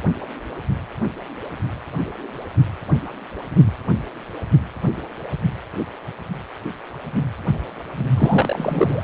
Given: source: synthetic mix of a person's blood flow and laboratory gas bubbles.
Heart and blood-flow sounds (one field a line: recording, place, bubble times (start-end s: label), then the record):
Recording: Doppler ultrasound of blood flow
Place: precordium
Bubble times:
8.17-9.03 s: bubbles
From the record:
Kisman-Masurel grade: 212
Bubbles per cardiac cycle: several, 3 to 8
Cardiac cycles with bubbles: 1 to 10%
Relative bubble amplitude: moderate (0.250 to 0.450)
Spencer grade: 1 (occasional bubble signal discernible with the cardiac motion signal, with majority of cardiac periods free of bubbles)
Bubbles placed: anywhere in the cardiac cycle